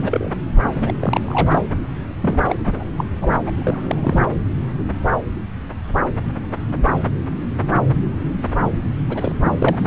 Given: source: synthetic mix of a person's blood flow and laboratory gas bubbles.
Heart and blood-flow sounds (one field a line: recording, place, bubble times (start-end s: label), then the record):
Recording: Doppler ultrasound of blood flow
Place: subclavian vein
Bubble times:
0.00-0.30 s: bubbles
0.75-0.93 s: bubbles
0.99-1.61 s: bubbles
2.21-2.41 s: bubbles
2.48-2.56 s: bubbles
2.64-2.84 s: bubbles
2.97-3.05 s: bubbles
3.22-3.33 s: bubbles
3.46-3.52 s: bubbles
3.61-4.21 s: bubbles
9.09-9.32 s: bubbles
9.45-9.87 s: bubbles
From the record:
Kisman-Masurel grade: 232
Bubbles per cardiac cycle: several, 3 to 8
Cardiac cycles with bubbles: 50 to 99%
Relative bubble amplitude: moderate (0.250 to 0.450)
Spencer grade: 3 (all of the cardiac periods contain showers or single bubble signals, but not dominating or overriding the cardiac motion signals)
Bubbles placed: anywhere in the cardiac cycle